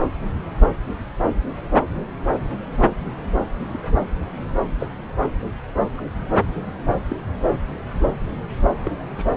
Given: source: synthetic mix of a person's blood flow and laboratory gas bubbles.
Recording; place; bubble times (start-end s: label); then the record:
Doppler ultrasound of blood flow; subclavian vein
3.73-3.78 s: bubbles
4.80-4.87 s: bubbles
5.97-6.02 s: bubbles
7.10-7.16 s: bubbles
8.85-8.90 s: bubbles
9.18-9.25 s: bubbles
From the record:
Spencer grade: 2 (many but less than half of the cardiac periods contain bubble signals, singularly or in groups); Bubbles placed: anywhere in the cardiac cycle